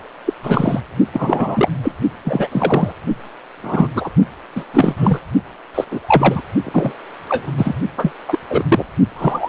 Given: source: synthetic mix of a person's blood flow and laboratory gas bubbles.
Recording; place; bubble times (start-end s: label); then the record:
Doppler ultrasound of blood flow; precordium
0.25-0.34 s: bubbles
0.42-0.81 s: bubbles
1.12-1.69 s: bubbles
1.82-1.95 s: bubbles
2.24-2.92 s: bubbles
3.63-3.88 s: bubbles
3.95-4.09 s: bubbles
4.55-4.64 s: bubbles
4.73-5.20 s: bubbles
5.74-5.84 s: bubbles
5.91-6.00 s: bubbles
6.06-6.41 s: bubbles
6.63-6.96 s: bubbles
7.28-7.51 s: bubbles
7.57-7.76 s: bubbles
7.97-8.11 s: bubbles
8.28-8.38 s: bubbles
8.49-8.64 s: bubbles
8.68-8.86 s: bubbles
9.15-9.49 s: bubbles
From the record:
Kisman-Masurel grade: 243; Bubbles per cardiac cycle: several, 3 to 8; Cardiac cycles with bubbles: 100%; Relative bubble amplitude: loud (0.450 to 0.775); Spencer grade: 3 (all of the cardiac periods contain showers or single bubble signals, but not dominating or overriding the cardiac motion signals); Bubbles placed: only in the low amplitude regions of the cardiac cycle